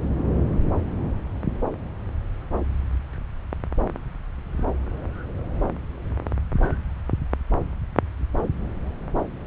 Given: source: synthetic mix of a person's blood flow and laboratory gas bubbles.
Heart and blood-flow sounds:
Doppler ultrasound of blood flow; subclavian vein
no bubbles
From the record:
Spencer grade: 0 (complete lack of bubble signals)

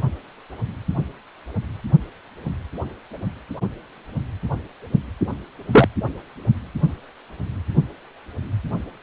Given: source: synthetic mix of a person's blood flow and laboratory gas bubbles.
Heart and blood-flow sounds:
Doppler ultrasound of blood flow; precordium
5.71-5.88 s: bubbles
From the record:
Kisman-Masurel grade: 113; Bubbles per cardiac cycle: 1 to 2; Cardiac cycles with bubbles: 1 to 10%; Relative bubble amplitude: loud (0.450 to 0.775); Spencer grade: 1 (occasional bubble signal discernible with the cardiac motion signal, with majority of cardiac periods free of bubbles); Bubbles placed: anywhere in the cardiac cycle

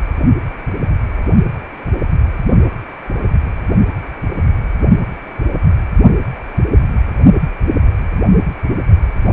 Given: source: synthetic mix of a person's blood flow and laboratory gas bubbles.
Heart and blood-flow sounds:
Doppler ultrasound of blood flow; precordium
no bubbles
From the record:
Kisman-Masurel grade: 000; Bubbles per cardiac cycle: 0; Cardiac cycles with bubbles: 0%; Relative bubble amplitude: no bubbles discernible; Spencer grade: 0 (complete lack of bubble signals)

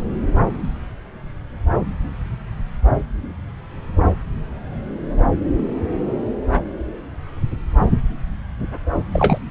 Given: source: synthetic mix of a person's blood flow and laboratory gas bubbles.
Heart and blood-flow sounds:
Doppler ultrasound of blood flow; subclavian vein
9.13-9.38 s: bubbles
From the record:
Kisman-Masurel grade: 113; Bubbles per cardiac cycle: 1 to 2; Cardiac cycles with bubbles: 1 to 10%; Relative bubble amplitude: loud (0.450 to 0.775); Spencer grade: 1 (occasional bubble signal discernible with the cardiac motion signal, with majority of cardiac periods free of bubbles); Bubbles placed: anywhere in the cardiac cycle

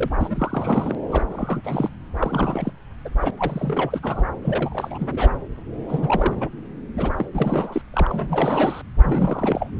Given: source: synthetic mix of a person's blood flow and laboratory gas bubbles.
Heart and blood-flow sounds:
Doppler ultrasound of blood flow; subclavian vein
0.00-0.08 s: bubbles
0.19-0.95 s: bubbles
1.08-1.89 s: bubbles
2.19-2.71 s: bubbles
3.04-3.09 s: bubbles
3.19-3.31 s: bubbles
3.39-4.00 s: bubbles
4.03-4.25 s: bubbles
4.42-5.09 s: bubbles
5.12-5.30 s: bubbles
5.89-6.49 s: bubbles
6.97-7.14 s: bubbles
7.17-7.26 s: bubbles
7.34-7.82 s: bubbles
7.94-8.81 s: bubbles
9.03-9.70 s: bubbles
From the record:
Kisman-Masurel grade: 342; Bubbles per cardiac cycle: rolling drumbeat, 9 or more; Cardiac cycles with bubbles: 100%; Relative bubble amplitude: moderate (0.250 to 0.450); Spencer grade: 3 (all of the cardiac periods contain showers or single bubble signals, but not dominating or overriding the cardiac motion signals); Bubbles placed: anywhere in the cardiac cycle

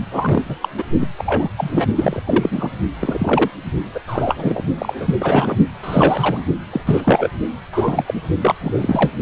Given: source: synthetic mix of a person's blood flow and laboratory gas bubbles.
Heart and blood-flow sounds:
Doppler ultrasound of blood flow; precordium
0.11-0.54 s: bubbles
0.61-0.69 s: bubbles
0.78-0.84 s: bubbles
1.00-1.07 s: bubbles
1.18-1.53 s: bubbles
1.57-1.88 s: bubbles
1.95-2.22 s: bubbles
2.27-2.70 s: bubbles
2.99-3.50 s: bubbles
3.94-4.00 s: bubbles
4.07-4.63 s: bubbles
4.78-5.14 s: bubbles
5.19-5.57 s: bubbles
5.83-6.44 s: bubbles
6.72-6.81 s: bubbles
6.85-7.29 s: bubbles
7.72-8.22 s: bubbles
8.41-8.55 s: bubbles
8.60-9.11 s: bubbles
From the record:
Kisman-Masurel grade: 243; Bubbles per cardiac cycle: several, 3 to 8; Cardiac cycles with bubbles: 100%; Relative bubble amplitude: loud (0.450 to 0.775); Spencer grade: 3 (all of the cardiac periods contain showers or single bubble signals, but not dominating or overriding the cardiac motion signals); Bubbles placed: only in the low amplitude regions of the cardiac cycle

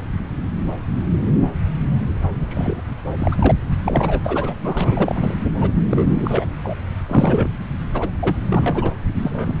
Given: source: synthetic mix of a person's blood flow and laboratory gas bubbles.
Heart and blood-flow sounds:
Doppler ultrasound of blood flow; subclavian vein
2.38-2.81 s: bubbles
3.19-3.52 s: bubbles
3.83-4.21 s: bubbles
4.24-4.54 s: bubbles
4.62-5.38 s: bubbles
5.61-5.71 s: bubbles
5.75-5.83 s: bubbles
5.90-6.46 s: bubbles
6.63-6.77 s: bubbles
7.08-7.49 s: bubbles
7.93-8.10 s: bubbles
8.21-8.36 s: bubbles
8.48-8.92 s: bubbles
9.15-9.57 s: bubbles
From the record:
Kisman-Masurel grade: 332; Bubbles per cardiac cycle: rolling drumbeat, 9 or more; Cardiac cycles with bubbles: 50 to 99%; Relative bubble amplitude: moderate (0.250 to 0.450); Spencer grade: 3 (all of the cardiac periods contain showers or single bubble signals, but not dominating or overriding the cardiac motion signals); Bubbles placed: anywhere in the cardiac cycle

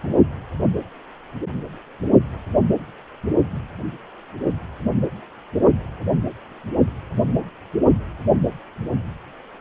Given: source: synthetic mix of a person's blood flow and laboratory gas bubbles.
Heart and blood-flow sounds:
Doppler ultrasound of blood flow; precordium
0.03-0.17 s: bubbles
From the record:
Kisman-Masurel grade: 111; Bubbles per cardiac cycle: 1 to 2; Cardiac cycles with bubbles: 1 to 10%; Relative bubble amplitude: barely perceptible (0.100 to 0.250); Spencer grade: 1 (occasional bubble signal discernible with the cardiac motion signal, with majority of cardiac periods free of bubbles); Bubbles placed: anywhere in the cardiac cycle

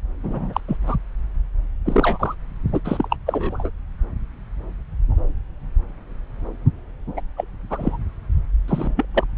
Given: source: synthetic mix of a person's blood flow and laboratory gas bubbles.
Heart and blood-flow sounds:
Doppler ultrasound of blood flow; subclavian vein
0.23-0.60 s: bubbles
0.68-0.76 s: bubbles
0.86-0.96 s: bubbles
1.85-2.34 s: bubbles
2.72-2.80 s: bubbles
2.84-3.17 s: bubbles
3.26-3.70 s: bubbles
7.17-7.21 s: bubbles
7.36-7.45 s: bubbles
7.69-7.98 s: bubbles
8.68-9.05 s: bubbles
9.14-9.25 s: bubbles
From the record:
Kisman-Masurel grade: 232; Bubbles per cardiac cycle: several, 3 to 8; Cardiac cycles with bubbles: 50 to 99%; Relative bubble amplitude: moderate (0.250 to 0.450); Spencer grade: 3 (all of the cardiac periods contain showers or single bubble signals, but not dominating or overriding the cardiac motion signals); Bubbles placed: anywhere in the cardiac cycle

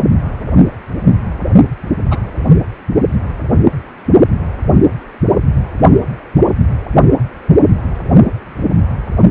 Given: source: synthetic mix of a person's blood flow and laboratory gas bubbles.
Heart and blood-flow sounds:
Doppler ultrasound of blood flow; precordium
2.10-2.19 s: bubbles
From the record:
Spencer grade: 2 (many but less than half of the cardiac periods contain bubble signals, singularly or in groups); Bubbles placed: only in the low amplitude regions of the cardiac cycle

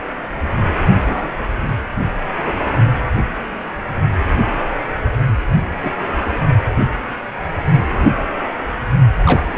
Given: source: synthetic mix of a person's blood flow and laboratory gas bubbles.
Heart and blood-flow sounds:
Doppler ultrasound of blood flow; precordium
1.01-1.31 s: bubbles
2.44-2.60 s: bubbles
5.82-5.91 s: bubbles
9.24-9.44 s: bubbles
From the record:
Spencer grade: 2 (many but less than half of the cardiac periods contain bubble signals, singularly or in groups); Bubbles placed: only in the low amplitude regions of the cardiac cycle

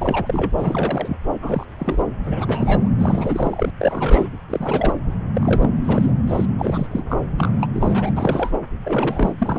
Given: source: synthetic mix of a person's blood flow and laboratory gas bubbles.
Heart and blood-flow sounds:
Doppler ultrasound of blood flow; subclavian vein
0.00-0.51 s: bubbles
0.57-1.17 s: bubbles
1.40-1.65 s: bubbles
1.78-2.05 s: bubbles
2.23-2.90 s: bubbles
2.98-3.70 s: bubbles
3.79-4.29 s: bubbles
4.50-4.94 s: bubbles
5.35-5.71 s: bubbles
5.84-6.12 s: bubbles
6.27-6.46 s: bubbles
6.58-6.87 s: bubbles
6.91-7.04 s: bubbles
7.10-7.18 s: bubbles
7.38-7.51 s: bubbles
7.59-7.67 s: bubbles
7.73-8.13 s: bubbles
8.16-8.57 s: bubbles
8.84-9.33 s: bubbles
9.38-9.59 s: bubbles
From the record:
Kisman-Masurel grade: 342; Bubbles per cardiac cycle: rolling drumbeat, 9 or more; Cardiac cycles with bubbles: 100%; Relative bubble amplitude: moderate (0.250 to 0.450); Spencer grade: 3 (all of the cardiac periods contain showers or single bubble signals, but not dominating or overriding the cardiac motion signals); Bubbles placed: anywhere in the cardiac cycle

